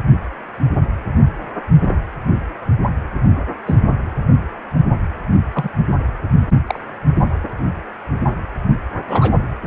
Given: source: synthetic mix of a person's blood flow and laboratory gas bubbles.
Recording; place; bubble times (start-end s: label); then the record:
Doppler ultrasound of blood flow; precordium
1.82-1.94 s: bubbles
3.66-3.75 s: bubbles
5.54-5.70 s: bubbles
6.67-6.79 s: bubbles
9.07-9.38 s: bubbles
From the record:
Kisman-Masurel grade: 122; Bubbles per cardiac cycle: 1 to 2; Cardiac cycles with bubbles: 10 to 50%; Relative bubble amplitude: moderate (0.250 to 0.450); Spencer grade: 2 (many but less than half of the cardiac periods contain bubble signals, singularly or in groups); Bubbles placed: only in the low amplitude regions of the cardiac cycle